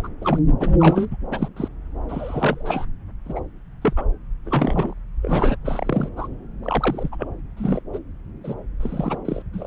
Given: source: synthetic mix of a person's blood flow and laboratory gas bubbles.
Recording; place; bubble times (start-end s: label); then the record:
Doppler ultrasound of blood flow; subclavian vein
0.00-0.08 s: bubbles
0.21-0.39 s: bubbles
0.60-0.74 s: bubbles
0.80-1.05 s: bubbles
1.10-1.16 s: bubbles
1.31-1.48 s: bubbles
1.56-1.68 s: bubbles
2.08-2.85 s: bubbles
3.25-3.40 s: bubbles
3.81-3.93 s: bubbles
3.96-4.04 s: bubbles
4.45-4.93 s: bubbles
5.22-5.56 s: bubbles
5.65-6.09 s: bubbles
6.16-6.28 s: bubbles
6.63-7.09 s: bubbles
7.12-7.16 s: bubbles
7.19-7.27 s: bubbles
7.57-7.81 s: bubbles
7.93-7.99 s: bubbles
8.44-8.54 s: bubbles
8.80-9.18 s: bubbles
9.25-9.43 s: bubbles
9.53-9.67 s: bubbles
From the record:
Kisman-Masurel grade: 242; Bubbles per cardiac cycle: several, 3 to 8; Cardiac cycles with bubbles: 100%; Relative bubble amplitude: moderate (0.250 to 0.450); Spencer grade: 3 (all of the cardiac periods contain showers or single bubble signals, but not dominating or overriding the cardiac motion signals); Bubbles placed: anywhere in the cardiac cycle